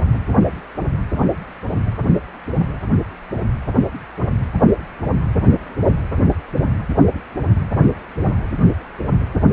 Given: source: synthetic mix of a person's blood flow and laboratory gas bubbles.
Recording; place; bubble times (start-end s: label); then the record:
Doppler ultrasound of blood flow; precordium
no bubbles
From the record:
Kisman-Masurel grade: 000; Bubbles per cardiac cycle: 0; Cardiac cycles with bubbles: 0%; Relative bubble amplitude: no bubbles discernible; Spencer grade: 0 (complete lack of bubble signals)